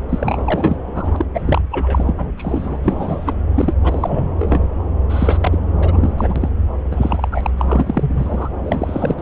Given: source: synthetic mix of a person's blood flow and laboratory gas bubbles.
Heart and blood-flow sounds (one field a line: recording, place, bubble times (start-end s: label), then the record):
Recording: Doppler ultrasound of blood flow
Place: subclavian vein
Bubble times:
0.09-0.77 s: bubbles
0.94-1.25 s: bubbles
1.34-1.62 s: bubbles
1.71-2.13 s: bubbles
2.17-2.31 s: bubbles
2.37-3.33 s: bubbles
3.54-3.74 s: bubbles
3.83-4.29 s: bubbles
4.38-4.62 s: bubbles
5.09-5.38 s: bubbles
5.41-5.58 s: bubbles
5.77-6.13 s: bubbles
6.18-6.49 s: bubbles
6.91-7.28 s: bubbles
7.31-7.50 s: bubbles
7.58-8.49 s: bubbles
8.59-9.22 s: bubbles
From the record:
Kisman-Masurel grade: 342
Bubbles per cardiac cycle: rolling drumbeat, 9 or more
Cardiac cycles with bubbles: 100%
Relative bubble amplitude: moderate (0.250 to 0.450)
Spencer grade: 3 (all of the cardiac periods contain showers or single bubble signals, but not dominating or overriding the cardiac motion signals)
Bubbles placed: anywhere in the cardiac cycle